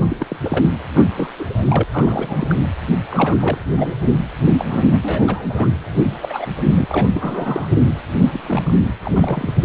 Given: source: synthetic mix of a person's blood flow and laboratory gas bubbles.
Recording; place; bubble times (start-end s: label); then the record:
Doppler ultrasound of blood flow; precordium
0.00-0.16 s: bubbles
0.20-0.26 s: bubbles
0.29-0.36 s: bubbles
0.41-0.65 s: bubbles
0.94-1.06 s: bubbles
1.18-1.29 s: bubbles
1.38-1.83 s: bubbles
1.91-2.67 s: bubbles
3.10-3.58 s: bubbles
3.71-3.94 s: bubbles
4.04-4.18 s: bubbles
4.58-4.99 s: bubbles
5.03-5.46 s: bubbles
5.49-5.69 s: bubbles
5.86-6.17 s: bubbles
6.22-6.47 s: bubbles
6.66-6.86 s: bubbles
6.90-7.10 s: bubbles
7.14-7.69 s: bubbles
8.33-8.39 s: bubbles
8.42-8.73 s: bubbles
9.03-9.53 s: bubbles
9.61-9.64 s: bubbles
From the record:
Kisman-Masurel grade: 342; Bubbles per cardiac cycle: rolling drumbeat, 9 or more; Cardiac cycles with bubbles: 100%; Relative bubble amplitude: moderate (0.250 to 0.450); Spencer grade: 3 (all of the cardiac periods contain showers or single bubble signals, but not dominating or overriding the cardiac motion signals); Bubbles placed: anywhere in the cardiac cycle